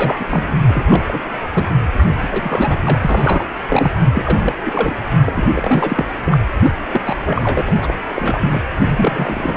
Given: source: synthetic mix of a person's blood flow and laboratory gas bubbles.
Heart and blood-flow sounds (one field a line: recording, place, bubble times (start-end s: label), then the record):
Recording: Doppler ultrasound of blood flow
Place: precordium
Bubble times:
0.00-0.25 s: bubbles
0.29-0.55 s: bubbles
0.67-1.03 s: bubbles
1.06-1.19 s: bubbles
1.53-1.69 s: bubbles
2.00-2.06 s: bubbles
2.21-2.29 s: bubbles
2.31-2.79 s: bubbles
2.85-3.44 s: bubbles
3.68-3.92 s: bubbles
4.13-4.57 s: bubbles
4.63-4.93 s: bubbles
5.26-5.33 s: bubbles
5.35-6.04 s: bubbles
6.25-6.38 s: bubbles
6.62-6.71 s: bubbles
6.93-7.15 s: bubbles
7.24-7.63 s: bubbles
7.66-7.97 s: bubbles
8.15-8.64 s: bubbles
8.85-9.57 s: bubbles
From the record:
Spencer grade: 3 (all of the cardiac periods contain showers or single bubble signals, but not dominating or overriding the cardiac motion signals)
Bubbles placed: anywhere in the cardiac cycle